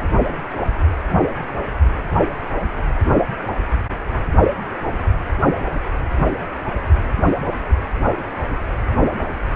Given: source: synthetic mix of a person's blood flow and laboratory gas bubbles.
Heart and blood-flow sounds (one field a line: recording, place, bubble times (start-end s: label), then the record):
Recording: Doppler ultrasound of blood flow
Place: precordium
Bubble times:
0.00-0.10 s: bubbles
From the record:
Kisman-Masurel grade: 211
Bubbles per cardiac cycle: several, 3 to 8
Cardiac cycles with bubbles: 1 to 10%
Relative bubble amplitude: barely perceptible (0.100 to 0.250)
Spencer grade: 1 (occasional bubble signal discernible with the cardiac motion signal, with majority of cardiac periods free of bubbles)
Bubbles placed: only in the low amplitude regions of the cardiac cycle